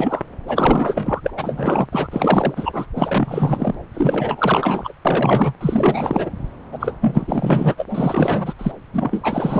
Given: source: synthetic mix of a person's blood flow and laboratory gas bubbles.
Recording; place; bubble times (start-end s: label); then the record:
Doppler ultrasound of blood flow; subclavian vein
0.00-0.24 s: bubbles
0.47-1.31 s: bubbles
1.37-1.88 s: bubbles
1.92-2.08 s: bubbles
2.10-2.86 s: bubbles
2.95-3.75 s: bubbles
3.94-4.92 s: bubbles
5.04-5.53 s: bubbles
5.61-6.30 s: bubbles
6.72-6.95 s: bubbles
7.00-7.84 s: bubbles
7.89-8.53 s: bubbles
8.58-8.72 s: bubbles
8.93-9.60 s: bubbles
From the record:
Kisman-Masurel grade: 444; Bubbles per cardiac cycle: continuous sound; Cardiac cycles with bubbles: 100%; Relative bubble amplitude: maximal (0.775 to 0.999); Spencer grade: 4 (maximum detectable bubble signal sounding continuously throughout systole and diastole of every cardiac period, and overriding the amplitude of the normal cardiac signals); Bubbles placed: anywhere in the cardiac cycle